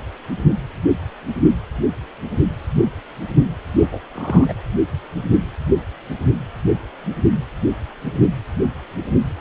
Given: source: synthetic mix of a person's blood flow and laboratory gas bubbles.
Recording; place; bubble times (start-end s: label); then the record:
Doppler ultrasound of blood flow; precordium
3.77-3.99 s: bubbles
4.14-4.53 s: bubbles
From the record:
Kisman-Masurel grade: 212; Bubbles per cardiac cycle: several, 3 to 8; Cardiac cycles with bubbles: 1 to 10%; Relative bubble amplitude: moderate (0.250 to 0.450); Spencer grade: 1 (occasional bubble signal discernible with the cardiac motion signal, with majority of cardiac periods free of bubbles); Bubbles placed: anywhere in the cardiac cycle